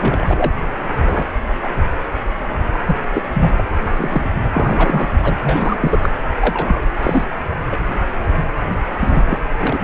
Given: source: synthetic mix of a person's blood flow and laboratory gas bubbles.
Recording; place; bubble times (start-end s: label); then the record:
Doppler ultrasound of blood flow; precordium
0.00-0.53 s: bubbles
1.02-1.25 s: bubbles
1.62-1.69 s: bubbles
2.73-2.79 s: bubbles
2.87-2.97 s: bubbles
3.15-3.22 s: bubbles
3.34-3.52 s: bubbles
3.57-3.62 s: bubbles
3.98-4.29 s: bubbles
4.53-5.08 s: bubbles
5.22-5.37 s: bubbles
5.42-5.99 s: bubbles
6.02-6.09 s: bubbles
6.36-6.81 s: bubbles
7.02-7.25 s: bubbles
7.71-7.77 s: bubbles
9.00-9.38 s: bubbles
9.60-9.80 s: bubbles
From the record:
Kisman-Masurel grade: 232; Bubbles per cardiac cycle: several, 3 to 8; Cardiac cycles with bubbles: 50 to 99%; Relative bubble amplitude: moderate (0.250 to 0.450); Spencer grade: 3 (all of the cardiac periods contain showers or single bubble signals, but not dominating or overriding the cardiac motion signals); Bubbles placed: anywhere in the cardiac cycle